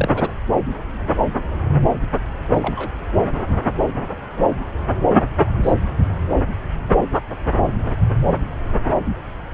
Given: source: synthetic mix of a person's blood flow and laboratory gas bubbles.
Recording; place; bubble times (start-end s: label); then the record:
Doppler ultrasound of blood flow; subclavian vein
0.00-0.11 s: bubbles
0.14-0.32 s: bubbles
2.53-2.88 s: bubbles
5.62-5.73 s: bubbles
From the record:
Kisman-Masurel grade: 122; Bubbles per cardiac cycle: 1 to 2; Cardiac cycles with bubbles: 10 to 50%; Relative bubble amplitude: moderate (0.250 to 0.450); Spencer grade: 2 (many but less than half of the cardiac periods contain bubble signals, singularly or in groups); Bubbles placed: anywhere in the cardiac cycle